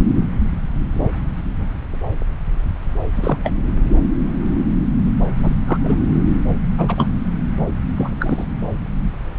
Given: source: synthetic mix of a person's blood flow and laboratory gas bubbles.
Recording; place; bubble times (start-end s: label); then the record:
Doppler ultrasound of blood flow; subclavian vein
3.16-3.39 s: bubbles
3.44-3.52 s: bubbles
5.37-5.54 s: bubbles
5.67-5.78 s: bubbles
5.83-5.95 s: bubbles
6.77-7.08 s: bubbles
7.96-8.10 s: bubbles
8.20-8.45 s: bubbles
From the record:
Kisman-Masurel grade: 222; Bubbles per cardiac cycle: several, 3 to 8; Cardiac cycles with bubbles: 10 to 50%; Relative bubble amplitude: moderate (0.250 to 0.450); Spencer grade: 2 (many but less than half of the cardiac periods contain bubble signals, singularly or in groups); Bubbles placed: anywhere in the cardiac cycle